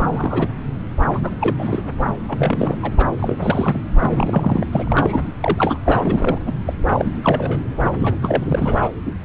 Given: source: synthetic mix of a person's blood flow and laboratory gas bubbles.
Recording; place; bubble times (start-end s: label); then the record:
Doppler ultrasound of blood flow; subclavian vein
0.00-0.47 s: bubbles
1.14-1.20 s: bubbles
1.23-1.30 s: bubbles
1.41-1.55 s: bubbles
1.58-1.86 s: bubbles
1.97-2.11 s: bubbles
2.28-2.91 s: bubbles
2.97-3.08 s: bubbles
3.19-3.80 s: bubbles
4.00-4.67 s: bubbles
4.72-5.33 s: bubbles
5.40-5.77 s: bubbles
5.85-6.39 s: bubbles
6.46-6.52 s: bubbles
6.65-6.73 s: bubbles
6.85-7.12 s: bubbles
7.22-7.60 s: bubbles
7.83-7.91 s: bubbles
7.99-8.16 s: bubbles
8.22-8.90 s: bubbles
9.06-9.12 s: bubbles
From the record:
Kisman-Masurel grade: 342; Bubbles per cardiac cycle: rolling drumbeat, 9 or more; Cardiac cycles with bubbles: 100%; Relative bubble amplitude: moderate (0.250 to 0.450); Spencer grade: 3 (all of the cardiac periods contain showers or single bubble signals, but not dominating or overriding the cardiac motion signals); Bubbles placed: anywhere in the cardiac cycle